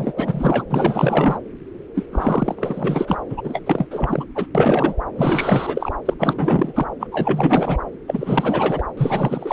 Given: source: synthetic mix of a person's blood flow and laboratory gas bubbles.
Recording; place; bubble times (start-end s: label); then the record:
Doppler ultrasound of blood flow; subclavian vein
0.00-0.13 s: bubbles
0.16-0.65 s: bubbles
0.70-1.39 s: bubbles
1.95-2.04 s: bubbles
2.12-3.17 s: bubbles
3.29-3.62 s: bubbles
3.65-4.25 s: bubbles
4.35-4.46 s: bubbles
4.54-4.95 s: bubbles
5.16-5.92 s: bubbles
6.05-6.14 s: bubbles
6.19-6.87 s: bubbles
7.00-7.07 s: bubbles
7.11-7.78 s: bubbles
8.07-8.83 s: bubbles
8.97-9.53 s: bubbles
From the record:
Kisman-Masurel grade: 444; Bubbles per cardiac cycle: continuous sound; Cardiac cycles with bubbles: 100%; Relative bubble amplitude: maximal (0.775 to 0.999); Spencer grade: 4 (maximum detectable bubble signal sounding continuously throughout systole and diastole of every cardiac period, and overriding the amplitude of the normal cardiac signals); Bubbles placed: anywhere in the cardiac cycle